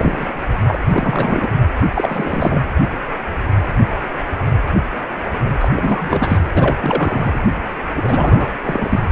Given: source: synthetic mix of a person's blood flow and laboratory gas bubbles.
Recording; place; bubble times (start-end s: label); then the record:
Doppler ultrasound of blood flow; precordium
0.00-0.34 s: bubbles
0.68-0.79 s: bubbles
0.90-1.53 s: bubbles
1.94-2.63 s: bubbles
5.59-5.68 s: bubbles
5.76-6.50 s: bubbles
6.54-7.38 s: bubbles
7.94-8.47 s: bubbles
8.65-9.00 s: bubbles
9.10-9.12 s: bubbles
From the record:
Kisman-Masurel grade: 332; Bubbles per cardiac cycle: rolling drumbeat, 9 or more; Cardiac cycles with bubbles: 50 to 99%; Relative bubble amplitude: moderate (0.250 to 0.450); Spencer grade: 3 (all of the cardiac periods contain showers or single bubble signals, but not dominating or overriding the cardiac motion signals); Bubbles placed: anywhere in the cardiac cycle